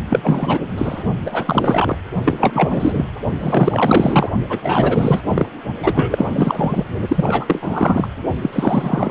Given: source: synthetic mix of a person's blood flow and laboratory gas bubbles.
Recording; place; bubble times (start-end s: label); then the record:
Doppler ultrasound of blood flow; precordium
0.09-0.60 s: bubbles
0.77-1.03 s: bubbles
1.20-1.97 s: bubbles
2.25-3.05 s: bubbles
3.40-4.29 s: bubbles
4.49-4.58 s: bubbles
4.62-5.21 s: bubbles
5.25-5.46 s: bubbles
5.82-6.27 s: bubbles
6.33-6.83 s: bubbles
7.08-8.07 s: bubbles
8.41-8.50 s: bubbles
8.53-9.11 s: bubbles
From the record:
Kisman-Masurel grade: 343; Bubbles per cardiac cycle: rolling drumbeat, 9 or more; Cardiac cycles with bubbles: 100%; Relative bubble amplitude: loud (0.450 to 0.775); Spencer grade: 3 (all of the cardiac periods contain showers or single bubble signals, but not dominating or overriding the cardiac motion signals); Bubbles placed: only in the low amplitude regions of the cardiac cycle